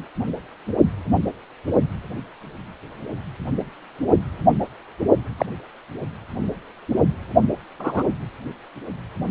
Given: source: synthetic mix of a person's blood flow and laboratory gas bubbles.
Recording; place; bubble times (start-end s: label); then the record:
Doppler ultrasound of blood flow; precordium
5.37-5.46 s: bubbles
7.79-8.04 s: bubbles
From the record:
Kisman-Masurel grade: 122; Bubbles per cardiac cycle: 1 to 2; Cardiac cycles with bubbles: 10 to 50%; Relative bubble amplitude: moderate (0.250 to 0.450); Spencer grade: 2 (many but less than half of the cardiac periods contain bubble signals, singularly or in groups); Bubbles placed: only in the low amplitude regions of the cardiac cycle